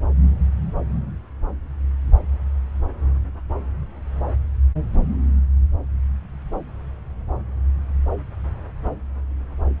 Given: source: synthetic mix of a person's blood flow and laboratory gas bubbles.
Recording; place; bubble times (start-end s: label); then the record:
Doppler ultrasound of blood flow; subclavian vein
no bubbles
From the record:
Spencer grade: 0 (complete lack of bubble signals)